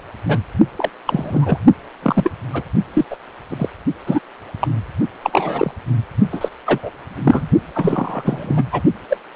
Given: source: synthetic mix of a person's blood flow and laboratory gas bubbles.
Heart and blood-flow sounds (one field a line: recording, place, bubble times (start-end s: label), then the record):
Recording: Doppler ultrasound of blood flow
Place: precordium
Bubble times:
0.28-0.39 s: bubbles
0.75-0.90 s: bubbles
1.06-1.57 s: bubbles
2.02-2.31 s: bubbles
2.53-2.63 s: bubbles
2.93-3.05 s: bubbles
3.10-3.17 s: bubbles
3.48-3.69 s: bubbles
4.06-4.19 s: bubbles
4.60-4.67 s: bubbles
5.22-5.71 s: bubbles
6.32-6.48 s: bubbles
6.64-6.79 s: bubbles
6.83-6.91 s: bubbles
7.23-7.48 s: bubbles
7.75-8.64 s: bubbles
8.71-8.82 s: bubbles
9.09-9.17 s: bubbles
From the record:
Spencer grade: 3 (all of the cardiac periods contain showers or single bubble signals, but not dominating or overriding the cardiac motion signals)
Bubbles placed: only in the low amplitude regions of the cardiac cycle